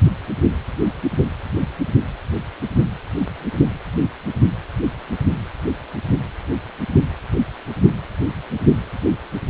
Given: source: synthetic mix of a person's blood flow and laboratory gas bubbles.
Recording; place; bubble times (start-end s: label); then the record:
Doppler ultrasound of blood flow; precordium
no bubbles
From the record:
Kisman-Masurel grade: 000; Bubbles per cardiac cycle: 0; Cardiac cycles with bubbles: 0%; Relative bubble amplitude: no bubbles discernible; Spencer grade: 0 (complete lack of bubble signals)